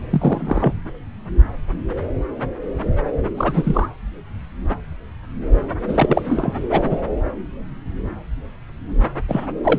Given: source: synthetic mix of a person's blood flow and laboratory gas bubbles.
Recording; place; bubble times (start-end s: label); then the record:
Doppler ultrasound of blood flow; subclavian vein
0.10-0.80 s: bubbles
3.37-3.87 s: bubbles
5.88-6.21 s: bubbles
6.24-6.54 s: bubbles
6.71-6.97 s: bubbles
9.29-9.46 s: bubbles
9.63-9.78 s: bubbles
From the record:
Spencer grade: 2 (many but less than half of the cardiac periods contain bubble signals, singularly or in groups); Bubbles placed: anywhere in the cardiac cycle